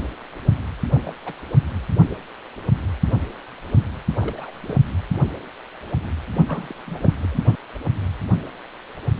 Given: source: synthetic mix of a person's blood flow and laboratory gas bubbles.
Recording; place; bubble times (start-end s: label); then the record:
Doppler ultrasound of blood flow; precordium
0.57-0.62 s: bubbles
0.90-1.00 s: bubbles
1.04-1.14 s: bubbles
1.25-1.33 s: bubbles
4.21-4.51 s: bubbles
4.61-4.75 s: bubbles
6.46-6.75 s: bubbles
6.87-7.15 s: bubbles
7.22-7.38 s: bubbles
From the record:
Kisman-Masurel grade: 221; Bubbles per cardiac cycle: several, 3 to 8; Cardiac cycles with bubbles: 10 to 50%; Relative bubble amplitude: barely perceptible (0.100 to 0.250); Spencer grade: 2 (many but less than half of the cardiac periods contain bubble signals, singularly or in groups); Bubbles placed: only in the low amplitude regions of the cardiac cycle